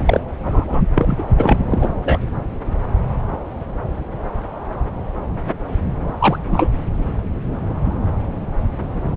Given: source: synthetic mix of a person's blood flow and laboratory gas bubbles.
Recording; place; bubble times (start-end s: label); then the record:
Doppler ultrasound of blood flow; subclavian vein
0.00-0.20 s: bubbles
0.44-0.82 s: bubbles
0.94-1.23 s: bubbles
1.38-1.58 s: bubbles
1.70-1.90 s: bubbles
2.01-2.25 s: bubbles
6.20-6.38 s: bubbles
6.47-6.68 s: bubbles
From the record:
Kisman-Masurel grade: 223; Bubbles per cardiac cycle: several, 3 to 8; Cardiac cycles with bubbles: 10 to 50%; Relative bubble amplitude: loud (0.450 to 0.775); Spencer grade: 2 (many but less than half of the cardiac periods contain bubble signals, singularly or in groups); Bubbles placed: anywhere in the cardiac cycle